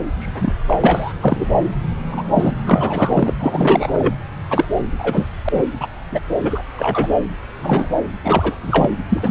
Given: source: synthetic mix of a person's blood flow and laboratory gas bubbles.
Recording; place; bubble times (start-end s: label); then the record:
Doppler ultrasound of blood flow; subclavian vein
0.19-0.54 s: bubbles
0.67-0.77 s: bubbles
0.80-1.13 s: bubbles
1.21-1.56 s: bubbles
2.11-2.22 s: bubbles
2.33-2.54 s: bubbles
2.66-3.33 s: bubbles
3.38-4.13 s: bubbles
4.50-4.65 s: bubbles
4.99-5.28 s: bubbles
5.45-5.49 s: bubbles
5.52-5.62 s: bubbles
5.80-5.87 s: bubbles
6.11-6.20 s: bubbles
6.42-6.60 s: bubbles
6.76-7.18 s: bubbles
7.62-8.09 s: bubbles
8.24-8.56 s: bubbles
8.62-8.90 s: bubbles
9.08-9.30 s: bubbles
From the record:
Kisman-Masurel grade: 243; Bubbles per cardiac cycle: several, 3 to 8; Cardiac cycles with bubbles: 100%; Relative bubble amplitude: loud (0.450 to 0.775); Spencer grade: 3 (all of the cardiac periods contain showers or single bubble signals, but not dominating or overriding the cardiac motion signals); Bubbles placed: anywhere in the cardiac cycle